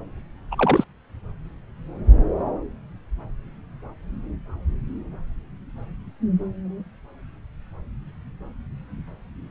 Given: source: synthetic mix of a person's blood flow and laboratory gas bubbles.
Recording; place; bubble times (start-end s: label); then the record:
Doppler ultrasound of blood flow; subclavian vein
0.51-0.84 s: bubbles
From the record:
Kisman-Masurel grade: 212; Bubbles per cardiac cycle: several, 3 to 8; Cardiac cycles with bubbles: 1 to 10%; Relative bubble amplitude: moderate (0.250 to 0.450); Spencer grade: 1 (occasional bubble signal discernible with the cardiac motion signal, with majority of cardiac periods free of bubbles); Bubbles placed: anywhere in the cardiac cycle